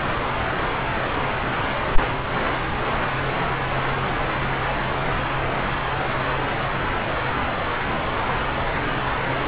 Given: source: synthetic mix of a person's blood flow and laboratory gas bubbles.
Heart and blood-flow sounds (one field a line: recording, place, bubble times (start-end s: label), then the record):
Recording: Doppler ultrasound of blood flow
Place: subclavian vein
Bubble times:
no bubbles
From the record:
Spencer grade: 0 (complete lack of bubble signals)